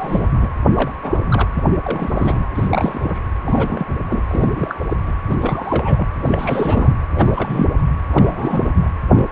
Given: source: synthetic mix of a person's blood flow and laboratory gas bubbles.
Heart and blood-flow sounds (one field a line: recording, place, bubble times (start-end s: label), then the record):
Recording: Doppler ultrasound of blood flow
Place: precordium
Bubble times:
0.00-0.51 s: bubbles
0.73-0.92 s: bubbles
1.02-1.21 s: bubbles
1.25-1.48 s: bubbles
1.53-1.63 s: bubbles
1.84-2.48 s: bubbles
2.54-3.20 s: bubbles
3.46-4.03 s: bubbles
4.08-4.22 s: bubbles
4.29-4.96 s: bubbles
5.04-5.12 s: bubbles
5.29-5.36 s: bubbles
5.41-6.07 s: bubbles
6.25-6.94 s: bubbles
7.14-7.78 s: bubbles
8.09-8.71 s: bubbles
8.76-8.89 s: bubbles
9.11-9.32 s: bubbles
From the record:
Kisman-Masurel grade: 342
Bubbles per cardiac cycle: rolling drumbeat, 9 or more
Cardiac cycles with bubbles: 100%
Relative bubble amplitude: moderate (0.250 to 0.450)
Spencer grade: 3 (all of the cardiac periods contain showers or single bubble signals, but not dominating or overriding the cardiac motion signals)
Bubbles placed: anywhere in the cardiac cycle